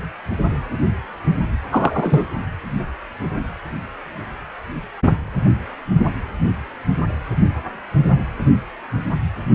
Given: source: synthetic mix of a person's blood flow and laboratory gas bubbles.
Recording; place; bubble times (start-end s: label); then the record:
Doppler ultrasound of blood flow; precordium
1.71-2.24 s: bubbles
From the record:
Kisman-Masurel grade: 213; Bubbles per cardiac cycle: several, 3 to 8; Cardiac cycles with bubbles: 1 to 10%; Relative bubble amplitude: loud (0.450 to 0.775); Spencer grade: 1 (occasional bubble signal discernible with the cardiac motion signal, with majority of cardiac periods free of bubbles); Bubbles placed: anywhere in the cardiac cycle